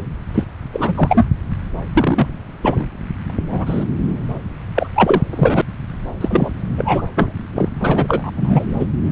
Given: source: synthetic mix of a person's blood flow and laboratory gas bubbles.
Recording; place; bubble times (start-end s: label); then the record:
Doppler ultrasound of blood flow; subclavian vein
0.34-0.44 s: bubbles
0.73-1.25 s: bubbles
1.94-2.27 s: bubbles
2.62-2.86 s: bubbles
3.29-3.31 s: bubbles
3.34-3.85 s: bubbles
4.75-4.90 s: bubbles
4.95-5.21 s: bubbles
5.29-5.62 s: bubbles
6.21-6.52 s: bubbles
6.77-7.03 s: bubbles
7.15-7.33 s: bubbles
7.54-7.69 s: bubbles
7.80-8.31 s: bubbles
8.36-8.65 s: bubbles
8.79-8.87 s: bubbles
From the record:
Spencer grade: 3 (all of the cardiac periods contain showers or single bubble signals, but not dominating or overriding the cardiac motion signals); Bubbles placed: anywhere in the cardiac cycle